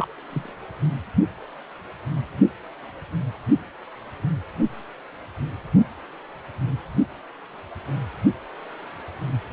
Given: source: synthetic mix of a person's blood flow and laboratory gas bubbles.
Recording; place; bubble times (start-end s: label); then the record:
Doppler ultrasound of blood flow; precordium
0.00-0.07 s: bubbles
0.29-0.53 s: bubbles
From the record:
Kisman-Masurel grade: 121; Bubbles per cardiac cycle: 1 to 2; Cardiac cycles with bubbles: 10 to 50%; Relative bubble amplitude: barely perceptible (0.100 to 0.250); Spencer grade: 2 (many but less than half of the cardiac periods contain bubble signals, singularly or in groups); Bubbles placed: only in the low amplitude regions of the cardiac cycle